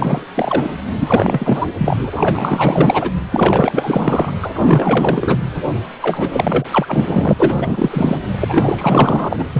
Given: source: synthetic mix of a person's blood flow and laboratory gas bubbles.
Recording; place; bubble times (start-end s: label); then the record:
Doppler ultrasound of blood flow; precordium
0.00-0.25 s: bubbles
0.34-0.70 s: bubbles
1.00-1.66 s: bubbles
1.78-2.10 s: bubbles
2.16-3.11 s: bubbles
3.31-4.32 s: bubbles
4.42-4.51 s: bubbles
4.54-5.39 s: bubbles
6.01-6.64 s: bubbles
6.71-7.33 s: bubbles
7.38-7.55 s: bubbles
7.58-8.18 s: bubbles
8.40-9.45 s: bubbles
9.54-9.60 s: bubbles
From the record:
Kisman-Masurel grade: 444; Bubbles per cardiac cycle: continuous sound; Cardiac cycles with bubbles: 100%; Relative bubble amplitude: maximal (0.775 to 0.999); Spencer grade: 4 (maximum detectable bubble signal sounding continuously throughout systole and diastole of every cardiac period, and overriding the amplitude of the normal cardiac signals); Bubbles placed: anywhere in the cardiac cycle